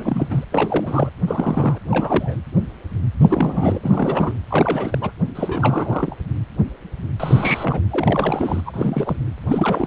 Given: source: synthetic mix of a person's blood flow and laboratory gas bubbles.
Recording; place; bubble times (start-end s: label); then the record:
Doppler ultrasound of blood flow; precordium
0.00-0.44 s: bubbles
0.52-1.10 s: bubbles
1.27-1.79 s: bubbles
1.90-2.37 s: bubbles
3.20-3.79 s: bubbles
3.83-4.34 s: bubbles
4.50-4.98 s: bubbles
5.01-5.11 s: bubbles
5.35-6.15 s: bubbles
7.20-7.80 s: bubbles
7.90-8.62 s: bubbles
8.66-9.17 s: bubbles
9.48-9.87 s: bubbles
From the record:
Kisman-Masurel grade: 332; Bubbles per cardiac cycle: rolling drumbeat, 9 or more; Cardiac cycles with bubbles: 50 to 99%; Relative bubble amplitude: moderate (0.250 to 0.450); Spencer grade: 3 (all of the cardiac periods contain showers or single bubble signals, but not dominating or overriding the cardiac motion signals); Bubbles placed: anywhere in the cardiac cycle